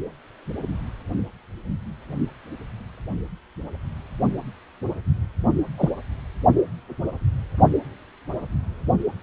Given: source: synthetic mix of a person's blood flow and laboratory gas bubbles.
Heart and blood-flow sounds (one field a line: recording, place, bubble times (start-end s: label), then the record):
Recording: Doppler ultrasound of blood flow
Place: precordium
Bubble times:
5.77-5.90 s: bubbles
From the record:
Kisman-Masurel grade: 112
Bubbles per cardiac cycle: 1 to 2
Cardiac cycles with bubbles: 1 to 10%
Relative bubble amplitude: moderate (0.250 to 0.450)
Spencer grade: 1 (occasional bubble signal discernible with the cardiac motion signal, with majority of cardiac periods free of bubbles)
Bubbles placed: only in the low amplitude regions of the cardiac cycle